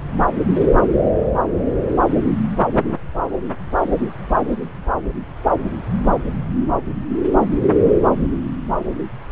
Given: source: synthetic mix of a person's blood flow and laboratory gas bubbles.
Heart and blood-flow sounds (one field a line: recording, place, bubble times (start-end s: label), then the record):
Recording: Doppler ultrasound of blood flow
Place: subclavian vein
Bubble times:
no bubbles
From the record:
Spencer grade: 0 (complete lack of bubble signals)